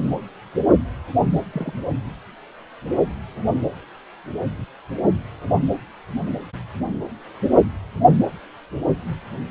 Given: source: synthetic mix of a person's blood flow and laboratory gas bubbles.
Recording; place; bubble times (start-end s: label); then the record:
Doppler ultrasound of blood flow; precordium
1.53-1.73 s: bubbles
From the record:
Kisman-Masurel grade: 111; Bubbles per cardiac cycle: 1 to 2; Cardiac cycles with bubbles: 1 to 10%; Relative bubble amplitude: barely perceptible (0.100 to 0.250); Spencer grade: 1 (occasional bubble signal discernible with the cardiac motion signal, with majority of cardiac periods free of bubbles); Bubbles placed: anywhere in the cardiac cycle